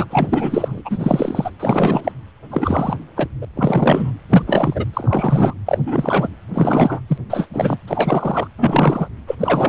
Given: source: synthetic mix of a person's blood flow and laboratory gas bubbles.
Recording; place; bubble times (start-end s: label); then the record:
Doppler ultrasound of blood flow; precordium
0.00-0.05 s: bubbles
0.10-0.81 s: bubbles
0.85-1.51 s: bubbles
1.59-2.12 s: bubbles
2.51-2.96 s: bubbles
3.16-3.27 s: bubbles
3.42-3.45 s: bubbles
3.56-4.13 s: bubbles
4.29-4.42 s: bubbles
4.47-4.86 s: bubbles
4.93-5.54 s: bubbles
5.66-5.78 s: bubbles
5.86-6.29 s: bubbles
6.54-7.00 s: bubbles
7.08-7.18 s: bubbles
7.29-7.47 s: bubbles
7.53-7.78 s: bubbles
7.88-8.47 s: bubbles
8.57-9.08 s: bubbles
9.27-9.35 s: bubbles
9.39-9.69 s: bubbles
From the record:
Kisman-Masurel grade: 343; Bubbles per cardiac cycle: rolling drumbeat, 9 or more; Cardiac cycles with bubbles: 100%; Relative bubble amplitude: loud (0.450 to 0.775); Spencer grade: 3 (all of the cardiac periods contain showers or single bubble signals, but not dominating or overriding the cardiac motion signals); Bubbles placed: anywhere in the cardiac cycle